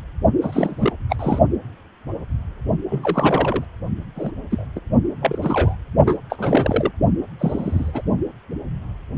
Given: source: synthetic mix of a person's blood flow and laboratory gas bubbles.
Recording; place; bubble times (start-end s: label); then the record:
Doppler ultrasound of blood flow; precordium
0.41-0.93 s: bubbles
1.09-1.16 s: bubbles
1.19-1.39 s: bubbles
2.90-3.65 s: bubbles
4.16-4.31 s: bubbles
4.50-4.65 s: bubbles
4.75-4.80 s: bubbles
5.21-5.76 s: bubbles
6.06-6.19 s: bubbles
6.29-6.91 s: bubbles
7.39-8.02 s: bubbles
From the record:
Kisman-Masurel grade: 232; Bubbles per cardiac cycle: several, 3 to 8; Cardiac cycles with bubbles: 50 to 99%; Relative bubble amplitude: moderate (0.250 to 0.450); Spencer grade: 3 (all of the cardiac periods contain showers or single bubble signals, but not dominating or overriding the cardiac motion signals); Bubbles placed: only in the low amplitude regions of the cardiac cycle